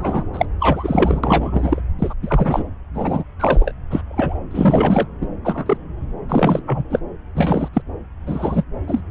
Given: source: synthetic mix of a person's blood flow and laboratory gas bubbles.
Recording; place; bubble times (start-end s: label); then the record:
Doppler ultrasound of blood flow; subclavian vein
0.00-0.24 s: bubbles
0.33-0.46 s: bubbles
0.60-1.21 s: bubbles
1.24-1.80 s: bubbles
1.99-2.13 s: bubbles
2.22-2.63 s: bubbles
2.94-3.23 s: bubbles
3.39-3.71 s: bubbles
3.90-4.01 s: bubbles
4.05-4.38 s: bubbles
4.50-5.08 s: bubbles
5.21-5.27 s: bubbles
5.44-5.77 s: bubbles
6.29-6.63 s: bubbles
6.67-6.84 s: bubbles
6.90-6.99 s: bubbles
7.34-7.68 s: bubbles
7.73-7.82 s: bubbles
8.26-8.64 s: bubbles
8.88-9.04 s: bubbles
From the record:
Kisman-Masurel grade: 242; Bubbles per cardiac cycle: several, 3 to 8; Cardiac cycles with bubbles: 100%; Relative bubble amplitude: moderate (0.250 to 0.450); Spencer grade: 3 (all of the cardiac periods contain showers or single bubble signals, but not dominating or overriding the cardiac motion signals); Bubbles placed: anywhere in the cardiac cycle